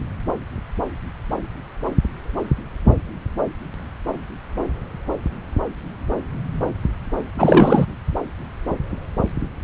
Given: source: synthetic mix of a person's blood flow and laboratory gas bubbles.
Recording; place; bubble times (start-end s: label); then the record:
Doppler ultrasound of blood flow; subclavian vein
7.38-7.86 s: bubbles
From the record:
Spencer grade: 1 (occasional bubble signal discernible with the cardiac motion signal, with majority of cardiac periods free of bubbles); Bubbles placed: anywhere in the cardiac cycle